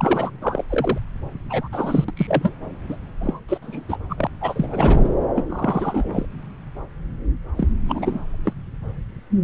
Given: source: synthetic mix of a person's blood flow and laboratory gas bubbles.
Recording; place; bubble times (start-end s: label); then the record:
Doppler ultrasound of blood flow; subclavian vein
0.00-0.31 s: bubbles
0.41-0.64 s: bubbles
0.69-0.98 s: bubbles
1.50-1.68 s: bubbles
1.72-2.04 s: bubbles
2.08-2.11 s: bubbles
2.17-2.55 s: bubbles
2.89-2.98 s: bubbles
3.21-3.41 s: bubbles
3.48-3.58 s: bubbles
3.62-3.99 s: bubbles
4.09-4.27 s: bubbles
4.40-5.14 s: bubbles
5.35-6.26 s: bubbles
7.56-7.69 s: bubbles
7.88-8.20 s: bubbles
8.44-8.53 s: bubbles
From the record:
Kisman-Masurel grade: 233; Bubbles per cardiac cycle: several, 3 to 8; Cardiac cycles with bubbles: 50 to 99%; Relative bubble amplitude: loud (0.450 to 0.775); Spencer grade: 3 (all of the cardiac periods contain showers or single bubble signals, but not dominating or overriding the cardiac motion signals); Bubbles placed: anywhere in the cardiac cycle